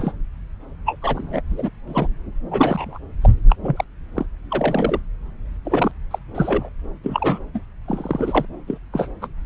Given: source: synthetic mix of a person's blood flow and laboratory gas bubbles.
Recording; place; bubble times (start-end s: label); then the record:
Doppler ultrasound of blood flow; subclavian vein
0.00-0.13 s: bubbles
0.86-0.97 s: bubbles
1.02-1.42 s: bubbles
1.50-1.70 s: bubbles
1.88-2.08 s: bubbles
2.51-2.98 s: bubbles
3.21-3.34 s: bubbles
3.50-3.56 s: bubbles
3.62-3.84 s: bubbles
4.17-4.25 s: bubbles
4.50-5.00 s: bubbles
5.65-5.92 s: bubbles
6.10-6.18 s: bubbles
6.34-6.69 s: bubbles
7.03-7.39 s: bubbles
7.54-7.60 s: bubbles
7.87-8.46 s: bubbles
8.67-8.78 s: bubbles
8.93-9.07 s: bubbles
9.22-9.28 s: bubbles
From the record:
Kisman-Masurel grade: 242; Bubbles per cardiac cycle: several, 3 to 8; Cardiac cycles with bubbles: 100%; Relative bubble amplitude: moderate (0.250 to 0.450); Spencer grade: 3 (all of the cardiac periods contain showers or single bubble signals, but not dominating or overriding the cardiac motion signals); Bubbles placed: anywhere in the cardiac cycle